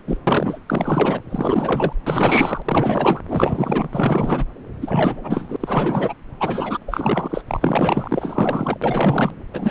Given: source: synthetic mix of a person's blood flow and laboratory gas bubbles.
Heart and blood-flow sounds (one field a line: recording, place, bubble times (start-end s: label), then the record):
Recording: Doppler ultrasound of blood flow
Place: subclavian vein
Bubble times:
0.00-0.02 s: bubbles
0.07-0.18 s: bubbles
0.27-0.58 s: bubbles
0.67-1.21 s: bubbles
1.31-1.93 s: bubbles
2.05-2.62 s: bubbles
2.65-3.21 s: bubbles
3.27-3.88 s: bubbles
3.92-4.45 s: bubbles
4.81-5.56 s: bubbles
5.60-6.13 s: bubbles
6.39-6.77 s: bubbles
6.88-7.42 s: bubbles
7.47-8.78 s: bubbles
8.82-9.32 s: bubbles
9.54-9.71 s: bubbles
From the record:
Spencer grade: 4 (maximum detectable bubble signal sounding continuously throughout systole and diastole of every cardiac period, and overriding the amplitude of the normal cardiac signals)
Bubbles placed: anywhere in the cardiac cycle